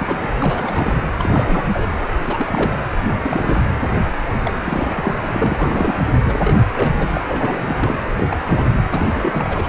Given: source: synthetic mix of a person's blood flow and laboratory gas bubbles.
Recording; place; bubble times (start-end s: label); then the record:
Doppler ultrasound of blood flow; precordium
0.00-0.29 s: bubbles
0.41-0.95 s: bubbles
1.19-1.65 s: bubbles
1.73-1.90 s: bubbles
2.26-2.84 s: bubbles
2.92-2.96 s: bubbles
3.04-3.65 s: bubbles
4.43-4.54 s: bubbles
4.65-5.14 s: bubbles
5.27-5.94 s: bubbles
6.24-6.57 s: bubbles
6.74-6.94 s: bubbles
6.97-7.17 s: bubbles
7.28-7.96 s: bubbles
8.15-8.45 s: bubbles
8.47-8.64 s: bubbles
8.73-8.79 s: bubbles
8.88-9.05 s: bubbles
9.14-9.68 s: bubbles
From the record:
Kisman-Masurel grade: 342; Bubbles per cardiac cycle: rolling drumbeat, 9 or more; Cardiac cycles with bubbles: 100%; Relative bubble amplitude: moderate (0.250 to 0.450); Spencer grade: 3 (all of the cardiac periods contain showers or single bubble signals, but not dominating or overriding the cardiac motion signals); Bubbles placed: anywhere in the cardiac cycle